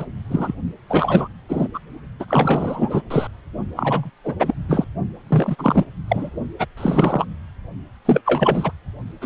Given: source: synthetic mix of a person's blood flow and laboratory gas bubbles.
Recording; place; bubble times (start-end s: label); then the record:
Doppler ultrasound of blood flow; precordium
0.00-0.05 s: bubbles
0.30-0.55 s: bubbles
0.90-1.28 s: bubbles
1.49-1.68 s: bubbles
1.74-1.79 s: bubbles
2.19-2.25 s: bubbles
2.28-3.01 s: bubbles
3.10-3.27 s: bubbles
3.75-4.10 s: bubbles
4.24-4.34 s: bubbles
4.39-4.54 s: bubbles
4.68-4.84 s: bubbles
5.29-5.55 s: bubbles
5.58-5.85 s: bubbles
6.08-6.29 s: bubbles
6.59-6.66 s: bubbles
6.77-7.25 s: bubbles
8.05-8.21 s: bubbles
8.25-8.71 s: bubbles
9.21-9.26 s: bubbles
From the record:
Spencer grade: 3 (all of the cardiac periods contain showers or single bubble signals, but not dominating or overriding the cardiac motion signals); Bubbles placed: only in the low amplitude regions of the cardiac cycle